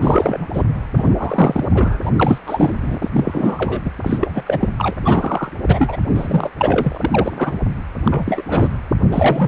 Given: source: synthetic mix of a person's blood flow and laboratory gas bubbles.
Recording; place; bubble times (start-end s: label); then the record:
Doppler ultrasound of blood flow; precordium
0.02-0.48 s: bubbles
0.53-0.63 s: bubbles
0.95-1.15 s: bubbles
1.18-1.65 s: bubbles
1.74-2.10 s: bubbles
2.17-2.38 s: bubbles
2.46-2.97 s: bubbles
3.01-3.10 s: bubbles
3.12-3.81 s: bubbles
3.85-3.91 s: bubbles
4.02-4.18 s: bubbles
4.21-4.43 s: bubbles
4.46-4.68 s: bubbles
4.78-4.95 s: bubbles
5.01-5.51 s: bubbles
5.67-5.97 s: bubbles
6.14-6.50 s: bubbles
6.58-7.58 s: bubbles
8.04-8.43 s: bubbles
8.48-8.76 s: bubbles
9.12-9.48 s: bubbles
From the record:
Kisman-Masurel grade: 343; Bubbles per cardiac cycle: rolling drumbeat, 9 or more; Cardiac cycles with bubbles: 100%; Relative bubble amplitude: loud (0.450 to 0.775); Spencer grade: 3 (all of the cardiac periods contain showers or single bubble signals, but not dominating or overriding the cardiac motion signals); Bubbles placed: anywhere in the cardiac cycle